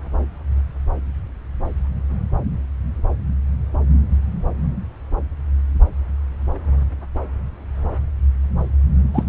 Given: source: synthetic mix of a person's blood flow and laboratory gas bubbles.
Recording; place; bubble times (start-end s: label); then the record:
Doppler ultrasound of blood flow; subclavian vein
9.13-9.24 s: bubbles
From the record:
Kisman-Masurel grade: 113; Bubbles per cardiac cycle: 1 to 2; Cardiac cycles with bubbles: 1 to 10%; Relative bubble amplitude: loud (0.450 to 0.775); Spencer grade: 1 (occasional bubble signal discernible with the cardiac motion signal, with majority of cardiac periods free of bubbles); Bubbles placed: anywhere in the cardiac cycle